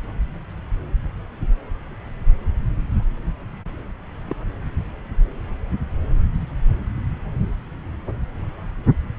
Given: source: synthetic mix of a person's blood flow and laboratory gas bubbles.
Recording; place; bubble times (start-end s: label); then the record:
Doppler ultrasound of blood flow; subclavian vein
4.29-4.36 s: bubbles
From the record:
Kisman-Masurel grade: 111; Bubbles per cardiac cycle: 1 to 2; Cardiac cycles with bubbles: 1 to 10%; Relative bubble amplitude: barely perceptible (0.100 to 0.250); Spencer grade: 1 (occasional bubble signal discernible with the cardiac motion signal, with majority of cardiac periods free of bubbles); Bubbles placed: anywhere in the cardiac cycle